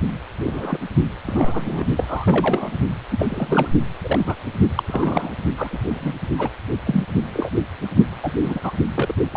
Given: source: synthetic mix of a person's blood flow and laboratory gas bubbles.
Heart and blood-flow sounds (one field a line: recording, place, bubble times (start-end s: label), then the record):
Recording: Doppler ultrasound of blood flow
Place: precordium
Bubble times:
0.45-0.79 s: bubbles
1.27-1.85 s: bubbles
1.97-2.77 s: bubbles
3.10-3.27 s: bubbles
3.29-3.69 s: bubbles
4.03-4.36 s: bubbles
4.76-4.83 s: bubbles
4.86-5.31 s: bubbles
5.56-6.14 s: bubbles
6.38-6.50 s: bubbles
6.85-7.04 s: bubbles
7.33-7.50 s: bubbles
8.23-8.31 s: bubbles
8.43-8.60 s: bubbles
8.63-8.72 s: bubbles
8.95-9.14 s: bubbles
9.31-9.37 s: bubbles
From the record:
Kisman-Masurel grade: 242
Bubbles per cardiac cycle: several, 3 to 8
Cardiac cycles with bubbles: 100%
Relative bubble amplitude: moderate (0.250 to 0.450)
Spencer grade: 3 (all of the cardiac periods contain showers or single bubble signals, but not dominating or overriding the cardiac motion signals)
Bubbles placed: only in the low amplitude regions of the cardiac cycle